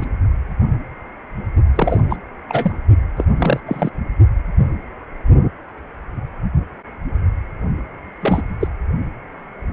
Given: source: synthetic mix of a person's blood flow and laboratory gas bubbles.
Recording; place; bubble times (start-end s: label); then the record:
Doppler ultrasound of blood flow; precordium
0.00-0.06 s: bubbles
1.75-2.00 s: bubbles
2.09-2.17 s: bubbles
2.48-2.75 s: bubbles
3.16-3.24 s: bubbles
3.39-3.60 s: bubbles
3.65-3.90 s: bubbles
8.22-8.42 s: bubbles
8.61-8.68 s: bubbles
From the record:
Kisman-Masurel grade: 223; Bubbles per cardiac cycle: several, 3 to 8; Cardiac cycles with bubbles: 10 to 50%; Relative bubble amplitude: loud (0.450 to 0.775); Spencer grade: 2 (many but less than half of the cardiac periods contain bubble signals, singularly or in groups); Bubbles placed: only in the low amplitude regions of the cardiac cycle